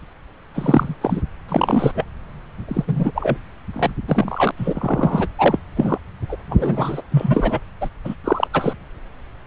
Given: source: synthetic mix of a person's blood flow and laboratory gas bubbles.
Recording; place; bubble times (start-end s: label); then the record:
Doppler ultrasound of blood flow; subclavian vein
0.55-0.94 s: bubbles
1.01-1.21 s: bubbles
1.49-1.92 s: bubbles
1.95-2.04 s: bubbles
2.67-3.12 s: bubbles
3.15-3.37 s: bubbles
3.73-3.90 s: bubbles
4.08-4.51 s: bubbles
4.58-5.28 s: bubbles
5.38-5.59 s: bubbles
5.75-5.98 s: bubbles
6.29-6.37 s: bubbles
6.50-7.01 s: bubbles
7.11-7.60 s: bubbles
7.81-7.89 s: bubbles
8.04-8.14 s: bubbles
8.24-8.47 s: bubbles
8.53-8.73 s: bubbles
From the record:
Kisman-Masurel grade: 233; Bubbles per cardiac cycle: several, 3 to 8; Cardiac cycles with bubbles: 50 to 99%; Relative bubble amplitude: loud (0.450 to 0.775); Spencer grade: 3 (all of the cardiac periods contain showers or single bubble signals, but not dominating or overriding the cardiac motion signals); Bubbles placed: anywhere in the cardiac cycle